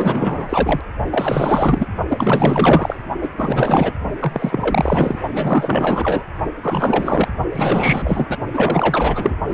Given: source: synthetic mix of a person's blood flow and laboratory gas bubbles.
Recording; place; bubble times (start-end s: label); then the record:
Doppler ultrasound of blood flow; precordium
0.00-0.81 s: bubbles
1.10-1.88 s: bubbles
2.08-2.96 s: bubbles
3.21-3.29 s: bubbles
3.38-3.93 s: bubbles
4.20-5.19 s: bubbles
5.33-6.23 s: bubbles
6.62-7.29 s: bubbles
7.52-8.26 s: bubbles
8.29-8.38 s: bubbles
8.53-9.36 s: bubbles
9.47-9.54 s: bubbles
From the record:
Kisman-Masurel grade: 444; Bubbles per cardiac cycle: continuous sound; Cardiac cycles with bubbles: 100%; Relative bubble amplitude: maximal (0.775 to 0.999); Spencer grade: 4 (maximum detectable bubble signal sounding continuously throughout systole and diastole of every cardiac period, and overriding the amplitude of the normal cardiac signals); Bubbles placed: only in the low amplitude regions of the cardiac cycle